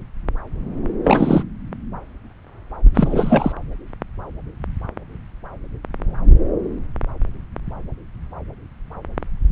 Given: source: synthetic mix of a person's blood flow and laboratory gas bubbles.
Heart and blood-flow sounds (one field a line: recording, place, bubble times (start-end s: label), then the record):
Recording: Doppler ultrasound of blood flow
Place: subclavian vein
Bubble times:
1.03-1.43 s: bubbles
2.95-3.52 s: bubbles
From the record:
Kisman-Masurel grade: 213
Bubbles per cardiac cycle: several, 3 to 8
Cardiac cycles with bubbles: 1 to 10%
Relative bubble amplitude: loud (0.450 to 0.775)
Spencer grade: 1 (occasional bubble signal discernible with the cardiac motion signal, with majority of cardiac periods free of bubbles)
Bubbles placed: anywhere in the cardiac cycle